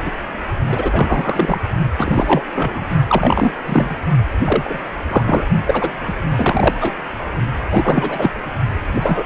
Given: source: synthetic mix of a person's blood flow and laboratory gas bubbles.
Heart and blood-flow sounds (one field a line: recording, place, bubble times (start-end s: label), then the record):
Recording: Doppler ultrasound of blood flow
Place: precordium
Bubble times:
0.05-0.12 s: bubbles
0.67-1.60 s: bubbles
1.97-2.44 s: bubbles
2.54-2.85 s: bubbles
3.08-3.52 s: bubbles
3.66-3.96 s: bubbles
4.44-4.79 s: bubbles
5.09-5.46 s: bubbles
5.66-5.92 s: bubbles
6.07-6.13 s: bubbles
6.36-6.74 s: bubbles
6.80-6.96 s: bubbles
7.70-8.30 s: bubbles
8.87-9.23 s: bubbles
From the record:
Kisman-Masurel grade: 243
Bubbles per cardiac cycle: several, 3 to 8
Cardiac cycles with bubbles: 100%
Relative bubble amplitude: loud (0.450 to 0.775)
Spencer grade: 3 (all of the cardiac periods contain showers or single bubble signals, but not dominating or overriding the cardiac motion signals)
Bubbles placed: only in the low amplitude regions of the cardiac cycle